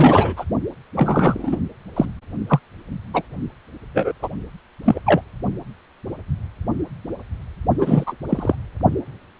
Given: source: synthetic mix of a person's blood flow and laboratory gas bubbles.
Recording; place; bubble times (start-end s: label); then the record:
Doppler ultrasound of blood flow; precordium
0.00-0.45 s: bubbles
0.95-1.56 s: bubbles
1.96-2.06 s: bubbles
2.48-2.60 s: bubbles
3.13-3.23 s: bubbles
3.94-4.12 s: bubbles
4.22-4.28 s: bubbles
4.85-5.01 s: bubbles
5.05-5.21 s: bubbles
7.79-8.12 s: bubbles
8.29-8.55 s: bubbles
From the record:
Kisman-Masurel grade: 233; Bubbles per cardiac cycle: several, 3 to 8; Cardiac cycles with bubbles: 50 to 99%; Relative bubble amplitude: loud (0.450 to 0.775); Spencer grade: 3 (all of the cardiac periods contain showers or single bubble signals, but not dominating or overriding the cardiac motion signals); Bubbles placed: only in the low amplitude regions of the cardiac cycle